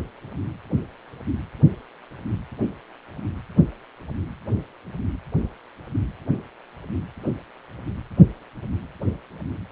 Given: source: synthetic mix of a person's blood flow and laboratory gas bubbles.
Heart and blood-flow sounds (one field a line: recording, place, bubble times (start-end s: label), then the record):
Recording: Doppler ultrasound of blood flow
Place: precordium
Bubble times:
no bubbles
From the record:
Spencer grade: 0 (complete lack of bubble signals)